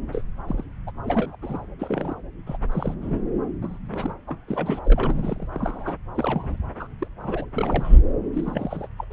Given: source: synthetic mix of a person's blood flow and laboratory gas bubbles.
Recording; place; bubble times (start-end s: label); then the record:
Doppler ultrasound of blood flow; subclavian vein
0.12-0.22 s: bubbles
0.48-0.64 s: bubbles
0.86-0.91 s: bubbles
1.03-1.36 s: bubbles
1.42-1.63 s: bubbles
1.79-2.15 s: bubbles
2.46-2.57 s: bubbles
2.71-2.94 s: bubbles
3.02-3.21 s: bubbles
3.62-3.78 s: bubbles
3.91-4.12 s: bubbles
4.27-4.38 s: bubbles
4.47-5.46 s: bubbles
5.54-5.95 s: bubbles
6.14-6.56 s: bubbles
6.79-6.88 s: bubbles
6.98-7.07 s: bubbles
7.19-7.46 s: bubbles
7.53-7.99 s: bubbles
8.33-8.88 s: bubbles
8.97-9.04 s: bubbles
9.10-9.13 s: bubbles
From the record:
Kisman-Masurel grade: 232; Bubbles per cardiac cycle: several, 3 to 8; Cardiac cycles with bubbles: 50 to 99%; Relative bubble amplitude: moderate (0.250 to 0.450); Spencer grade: 3 (all of the cardiac periods contain showers or single bubble signals, but not dominating or overriding the cardiac motion signals); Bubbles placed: anywhere in the cardiac cycle